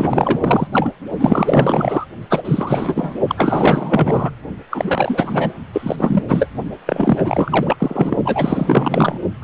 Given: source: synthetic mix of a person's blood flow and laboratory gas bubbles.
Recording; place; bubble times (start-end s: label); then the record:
Doppler ultrasound of blood flow; precordium
0.00-0.67 s: bubbles
0.72-0.91 s: bubbles
1.19-2.06 s: bubbles
2.29-3.14 s: bubbles
3.27-4.30 s: bubbles
4.71-5.54 s: bubbles
5.72-6.22 s: bubbles
6.27-6.46 s: bubbles
6.86-8.16 s: bubbles
8.24-9.19 s: bubbles
9.40-9.44 s: bubbles
From the record:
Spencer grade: 4 (maximum detectable bubble signal sounding continuously throughout systole and diastole of every cardiac period, and overriding the amplitude of the normal cardiac signals); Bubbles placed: only in the low amplitude regions of the cardiac cycle